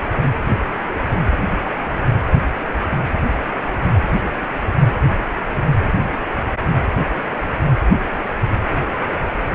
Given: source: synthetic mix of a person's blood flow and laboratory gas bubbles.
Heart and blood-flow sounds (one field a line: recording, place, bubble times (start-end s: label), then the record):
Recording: Doppler ultrasound of blood flow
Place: precordium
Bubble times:
0.87-0.97 s: bubbles
1.23-1.32 s: bubbles
From the record:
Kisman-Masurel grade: 111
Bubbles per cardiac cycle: 1 to 2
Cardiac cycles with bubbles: 1 to 10%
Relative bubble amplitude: barely perceptible (0.100 to 0.250)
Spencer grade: 1 (occasional bubble signal discernible with the cardiac motion signal, with majority of cardiac periods free of bubbles)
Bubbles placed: anywhere in the cardiac cycle